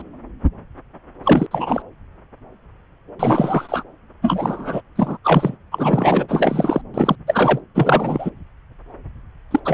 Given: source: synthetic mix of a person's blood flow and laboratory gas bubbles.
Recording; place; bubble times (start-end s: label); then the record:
Doppler ultrasound of blood flow; subclavian vein
0.00-0.02 s: bubbles
1.23-1.46 s: bubbles
1.51-1.82 s: bubbles
3.19-3.83 s: bubbles
4.22-4.82 s: bubbles
4.96-5.17 s: bubbles
5.24-5.58 s: bubbles
5.71-6.82 s: bubbles
6.94-7.16 s: bubbles
7.27-7.60 s: bubbles
7.75-8.30 s: bubbles
9.51-9.60 s: bubbles
9.65-9.74 s: bubbles
From the record:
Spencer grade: 3 (all of the cardiac periods contain showers or single bubble signals, but not dominating or overriding the cardiac motion signals); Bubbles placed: anywhere in the cardiac cycle